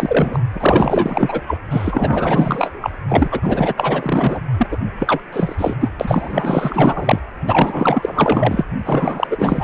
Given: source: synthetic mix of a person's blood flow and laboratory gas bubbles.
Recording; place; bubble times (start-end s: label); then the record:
Doppler ultrasound of blood flow; precordium
0.00-0.40 s: bubbles
0.53-1.42 s: bubbles
1.46-1.58 s: bubbles
1.70-2.91 s: bubbles
3.08-3.29 s: bubbles
3.31-3.40 s: bubbles
3.43-3.74 s: bubbles
3.77-4.41 s: bubbles
4.57-4.67 s: bubbles
4.71-4.78 s: bubbles
4.99-5.20 s: bubbles
5.33-5.75 s: bubbles
5.81-5.90 s: bubbles
6.00-7.20 s: bubbles
7.46-8.64 s: bubbles
8.84-9.27 s: bubbles
9.30-9.64 s: bubbles
From the record:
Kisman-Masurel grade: 444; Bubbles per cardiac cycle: continuous sound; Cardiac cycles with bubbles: 100%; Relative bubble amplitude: maximal (0.775 to 0.999); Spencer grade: 4 (maximum detectable bubble signal sounding continuously throughout systole and diastole of every cardiac period, and overriding the amplitude of the normal cardiac signals); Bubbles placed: anywhere in the cardiac cycle